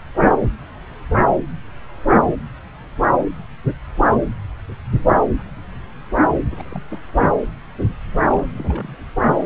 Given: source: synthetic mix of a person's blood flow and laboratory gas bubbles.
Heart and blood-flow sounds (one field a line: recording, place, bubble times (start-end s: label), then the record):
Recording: Doppler ultrasound of blood flow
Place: subclavian vein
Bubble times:
6.51-6.83 s: bubbles
6.89-7.00 s: bubbles
8.23-8.98 s: bubbles
9.29-9.46 s: bubbles
From the record:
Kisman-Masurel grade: 221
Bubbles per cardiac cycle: several, 3 to 8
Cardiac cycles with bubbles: 10 to 50%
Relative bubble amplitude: barely perceptible (0.100 to 0.250)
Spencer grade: 2 (many but less than half of the cardiac periods contain bubble signals, singularly or in groups)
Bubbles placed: anywhere in the cardiac cycle